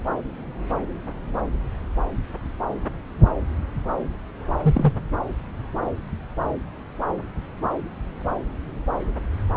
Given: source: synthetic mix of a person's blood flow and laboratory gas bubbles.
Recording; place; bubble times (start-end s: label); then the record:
Doppler ultrasound of blood flow; subclavian vein
4.62-4.94 s: bubbles
From the record:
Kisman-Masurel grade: 112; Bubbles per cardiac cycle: 1 to 2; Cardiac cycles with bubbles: 1 to 10%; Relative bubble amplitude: moderate (0.250 to 0.450); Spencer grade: 1 (occasional bubble signal discernible with the cardiac motion signal, with majority of cardiac periods free of bubbles); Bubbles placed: anywhere in the cardiac cycle